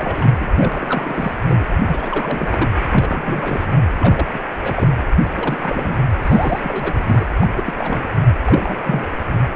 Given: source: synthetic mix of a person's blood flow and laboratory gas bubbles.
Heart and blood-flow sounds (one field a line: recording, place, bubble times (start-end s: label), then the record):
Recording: Doppler ultrasound of blood flow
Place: precordium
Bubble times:
0.00-0.31 s: bubbles
0.39-0.51 s: bubbles
0.58-1.34 s: bubbles
1.48-1.65 s: bubbles
1.87-2.69 s: bubbles
2.84-3.78 s: bubbles
3.97-4.27 s: bubbles
4.33-4.39 s: bubbles
4.62-4.88 s: bubbles
5.34-5.98 s: bubbles
6.22-7.25 s: bubbles
7.40-7.48 s: bubbles
7.54-7.63 s: bubbles
7.66-7.73 s: bubbles
7.77-8.05 s: bubbles
8.45-9.07 s: bubbles
From the record:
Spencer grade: 3 (all of the cardiac periods contain showers or single bubble signals, but not dominating or overriding the cardiac motion signals)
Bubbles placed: anywhere in the cardiac cycle